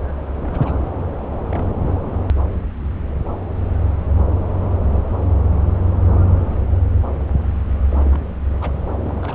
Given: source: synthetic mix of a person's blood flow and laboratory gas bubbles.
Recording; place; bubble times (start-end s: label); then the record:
Doppler ultrasound of blood flow; subclavian vein
0.37-0.76 s: bubbles
0.82-0.93 s: bubbles
1.49-1.64 s: bubbles
1.86-1.93 s: bubbles
7.88-8.21 s: bubbles
8.61-8.72 s: bubbles
8.99-9.35 s: bubbles
From the record:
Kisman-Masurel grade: 221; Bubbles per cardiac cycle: several, 3 to 8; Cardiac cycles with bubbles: 10 to 50%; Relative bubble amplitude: barely perceptible (0.100 to 0.250); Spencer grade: 2 (many but less than half of the cardiac periods contain bubble signals, singularly or in groups); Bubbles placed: anywhere in the cardiac cycle